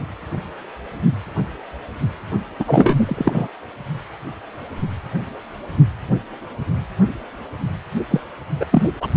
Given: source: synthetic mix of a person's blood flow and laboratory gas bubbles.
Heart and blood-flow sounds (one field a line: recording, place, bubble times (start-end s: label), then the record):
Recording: Doppler ultrasound of blood flow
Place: precordium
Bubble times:
2.59-3.47 s: bubbles
8.10-8.21 s: bubbles
8.60-8.66 s: bubbles
8.71-8.90 s: bubbles
9.01-9.08 s: bubbles
From the record:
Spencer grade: 2 (many but less than half of the cardiac periods contain bubble signals, singularly or in groups)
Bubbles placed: only in the low amplitude regions of the cardiac cycle